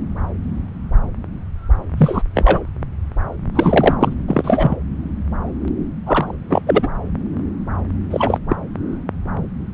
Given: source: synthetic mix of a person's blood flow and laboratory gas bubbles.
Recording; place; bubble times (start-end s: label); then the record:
Doppler ultrasound of blood flow; subclavian vein
1.97-2.23 s: bubbles
2.35-2.64 s: bubbles
3.54-3.95 s: bubbles
4.00-4.13 s: bubbles
4.28-4.76 s: bubbles
6.06-6.35 s: bubbles
6.49-6.62 s: bubbles
6.66-6.88 s: bubbles
8.11-8.38 s: bubbles
8.49-8.56 s: bubbles
From the record:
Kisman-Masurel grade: 223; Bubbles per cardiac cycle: several, 3 to 8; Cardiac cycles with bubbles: 10 to 50%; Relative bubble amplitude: loud (0.450 to 0.775); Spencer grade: 2 (many but less than half of the cardiac periods contain bubble signals, singularly or in groups); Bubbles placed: anywhere in the cardiac cycle